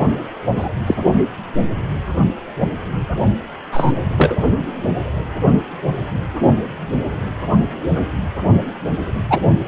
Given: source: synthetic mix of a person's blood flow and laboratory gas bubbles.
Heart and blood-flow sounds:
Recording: Doppler ultrasound of blood flow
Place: precordium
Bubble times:
0.55-0.68 s: bubbles
0.86-0.94 s: bubbles
3.71-3.92 s: bubbles
4.17-4.35 s: bubbles
9.29-9.39 s: bubbles
From the record:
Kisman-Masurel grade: 123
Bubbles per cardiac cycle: 1 to 2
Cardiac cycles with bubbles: 10 to 50%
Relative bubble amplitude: loud (0.450 to 0.775)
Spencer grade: 2 (many but less than half of the cardiac periods contain bubble signals, singularly or in groups)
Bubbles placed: only in the low amplitude regions of the cardiac cycle

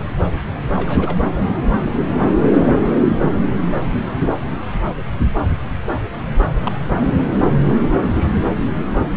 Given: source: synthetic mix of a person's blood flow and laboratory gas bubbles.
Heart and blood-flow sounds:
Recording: Doppler ultrasound of blood flow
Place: subclavian vein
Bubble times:
0.76-1.22 s: bubbles
3.22-3.35 s: bubbles
6.64-6.71 s: bubbles
6.98-7.15 s: bubbles
7.83-7.98 s: bubbles
From the record:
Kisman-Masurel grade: 121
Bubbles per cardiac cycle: 1 to 2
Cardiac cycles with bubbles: 10 to 50%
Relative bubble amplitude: barely perceptible (0.100 to 0.250)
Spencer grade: 2 (many but less than half of the cardiac periods contain bubble signals, singularly or in groups)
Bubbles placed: anywhere in the cardiac cycle

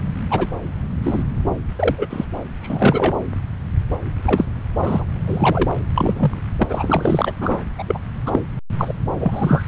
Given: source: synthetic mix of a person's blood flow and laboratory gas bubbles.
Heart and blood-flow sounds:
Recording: Doppler ultrasound of blood flow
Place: subclavian vein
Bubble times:
0.30-0.47 s: bubbles
1.02-1.23 s: bubbles
1.78-1.95 s: bubbles
1.98-2.06 s: bubbles
2.09-2.25 s: bubbles
2.61-3.14 s: bubbles
4.22-4.46 s: bubbles
4.77-5.04 s: bubbles
5.26-5.70 s: bubbles
5.95-6.41 s: bubbles
6.59-6.63 s: bubbles
6.69-7.33 s: bubbles
7.41-7.64 s: bubbles
7.78-7.83 s: bubbles
7.87-7.99 s: bubbles
8.26-8.46 s: bubbles
8.78-8.95 s: bubbles
9.20-9.65 s: bubbles
From the record:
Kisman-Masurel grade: 243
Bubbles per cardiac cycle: several, 3 to 8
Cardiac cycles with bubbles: 100%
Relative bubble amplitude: loud (0.450 to 0.775)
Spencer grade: 3 (all of the cardiac periods contain showers or single bubble signals, but not dominating or overriding the cardiac motion signals)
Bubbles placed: anywhere in the cardiac cycle

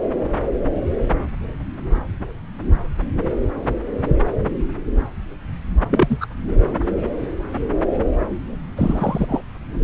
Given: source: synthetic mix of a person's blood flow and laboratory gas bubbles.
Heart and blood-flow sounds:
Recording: Doppler ultrasound of blood flow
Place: subclavian vein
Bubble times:
5.89-6.18 s: bubbles
6.21-6.27 s: bubbles
8.77-9.41 s: bubbles
From the record:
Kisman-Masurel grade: 122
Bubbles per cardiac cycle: 1 to 2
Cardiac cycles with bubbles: 10 to 50%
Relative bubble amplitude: moderate (0.250 to 0.450)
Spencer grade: 2 (many but less than half of the cardiac periods contain bubble signals, singularly or in groups)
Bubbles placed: anywhere in the cardiac cycle

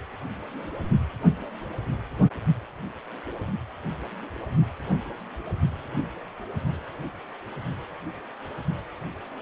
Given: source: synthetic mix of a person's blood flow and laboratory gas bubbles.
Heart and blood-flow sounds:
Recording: Doppler ultrasound of blood flow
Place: precordium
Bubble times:
no bubbles
From the record:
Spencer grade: 0 (complete lack of bubble signals)

